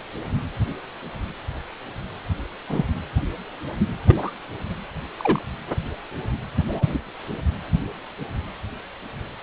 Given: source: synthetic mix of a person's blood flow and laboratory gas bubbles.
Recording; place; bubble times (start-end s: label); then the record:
Doppler ultrasound of blood flow; precordium
2.69-2.85 s: bubbles
4.07-4.32 s: bubbles
5.18-5.42 s: bubbles
6.68-6.99 s: bubbles
From the record:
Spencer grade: 2 (many but less than half of the cardiac periods contain bubble signals, singularly or in groups); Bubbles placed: anywhere in the cardiac cycle